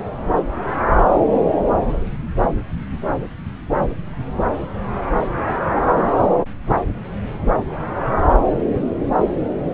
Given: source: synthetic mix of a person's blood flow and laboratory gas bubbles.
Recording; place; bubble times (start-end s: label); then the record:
Doppler ultrasound of blood flow; subclavian vein
no bubbles
From the record:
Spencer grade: 0 (complete lack of bubble signals)